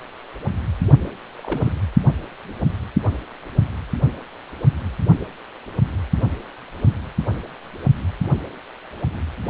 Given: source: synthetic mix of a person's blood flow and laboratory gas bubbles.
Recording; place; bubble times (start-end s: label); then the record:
Doppler ultrasound of blood flow; precordium
1.38-1.73 s: bubbles
From the record:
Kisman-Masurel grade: 121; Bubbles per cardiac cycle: 1 to 2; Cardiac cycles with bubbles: 10 to 50%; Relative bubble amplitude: barely perceptible (0.100 to 0.250); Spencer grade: 2 (many but less than half of the cardiac periods contain bubble signals, singularly or in groups); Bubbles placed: only in the low amplitude regions of the cardiac cycle